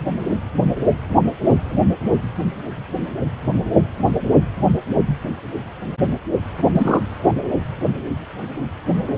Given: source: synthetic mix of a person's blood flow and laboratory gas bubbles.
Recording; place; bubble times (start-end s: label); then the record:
Doppler ultrasound of blood flow; precordium
6.73-7.00 s: bubbles
7.28-7.34 s: bubbles
From the record:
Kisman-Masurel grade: 212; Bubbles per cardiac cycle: several, 3 to 8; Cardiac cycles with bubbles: 1 to 10%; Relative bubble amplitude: moderate (0.250 to 0.450); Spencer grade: 1 (occasional bubble signal discernible with the cardiac motion signal, with majority of cardiac periods free of bubbles); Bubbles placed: anywhere in the cardiac cycle